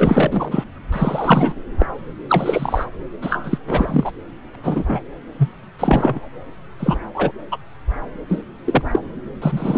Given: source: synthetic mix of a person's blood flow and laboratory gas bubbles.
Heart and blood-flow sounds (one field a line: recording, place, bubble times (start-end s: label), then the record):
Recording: Doppler ultrasound of blood flow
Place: subclavian vein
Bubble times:
0.00-0.64 s: bubbles
0.92-1.53 s: bubbles
1.78-1.86 s: bubbles
2.29-2.88 s: bubbles
3.22-3.58 s: bubbles
3.67-4.12 s: bubbles
4.53-4.55 s: bubbles
4.63-4.83 s: bubbles
4.87-5.00 s: bubbles
5.38-5.49 s: bubbles
5.79-6.20 s: bubbles
6.79-6.97 s: bubbles
7.15-7.32 s: bubbles
7.52-7.58 s: bubbles
8.29-8.43 s: bubbles
8.64-8.82 s: bubbles
8.92-9.00 s: bubbles
9.42-9.78 s: bubbles
From the record:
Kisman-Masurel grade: 233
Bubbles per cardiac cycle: several, 3 to 8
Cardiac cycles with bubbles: 50 to 99%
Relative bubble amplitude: loud (0.450 to 0.775)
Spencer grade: 3 (all of the cardiac periods contain showers or single bubble signals, but not dominating or overriding the cardiac motion signals)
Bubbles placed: anywhere in the cardiac cycle